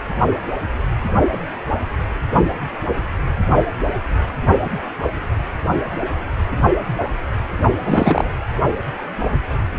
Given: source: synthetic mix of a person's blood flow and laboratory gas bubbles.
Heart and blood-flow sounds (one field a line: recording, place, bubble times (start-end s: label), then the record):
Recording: Doppler ultrasound of blood flow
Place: precordium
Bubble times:
7.84-8.29 s: bubbles
From the record:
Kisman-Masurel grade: 213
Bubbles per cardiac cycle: several, 3 to 8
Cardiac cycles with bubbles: 1 to 10%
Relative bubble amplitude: loud (0.450 to 0.775)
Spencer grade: 1 (occasional bubble signal discernible with the cardiac motion signal, with majority of cardiac periods free of bubbles)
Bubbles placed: only in the low amplitude regions of the cardiac cycle